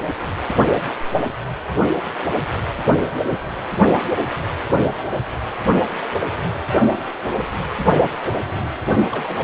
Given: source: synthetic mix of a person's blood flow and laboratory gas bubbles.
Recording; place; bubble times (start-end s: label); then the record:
Doppler ultrasound of blood flow; precordium
9.12-9.44 s: bubbles
From the record:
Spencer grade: 1 (occasional bubble signal discernible with the cardiac motion signal, with majority of cardiac periods free of bubbles); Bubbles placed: only in the low amplitude regions of the cardiac cycle